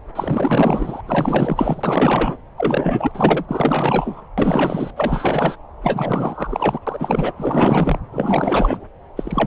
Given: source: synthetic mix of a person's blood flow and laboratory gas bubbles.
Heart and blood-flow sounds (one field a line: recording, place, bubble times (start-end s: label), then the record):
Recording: Doppler ultrasound of blood flow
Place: subclavian vein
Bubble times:
0.15-1.01 s: bubbles
1.06-2.38 s: bubbles
2.57-3.45 s: bubbles
3.48-4.21 s: bubbles
4.38-4.91 s: bubbles
4.96-5.56 s: bubbles
5.83-6.79 s: bubbles
6.87-7.32 s: bubbles
7.37-8.00 s: bubbles
8.12-8.86 s: bubbles
9.16-9.47 s: bubbles
From the record:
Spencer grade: 4 (maximum detectable bubble signal sounding continuously throughout systole and diastole of every cardiac period, and overriding the amplitude of the normal cardiac signals)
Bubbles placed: anywhere in the cardiac cycle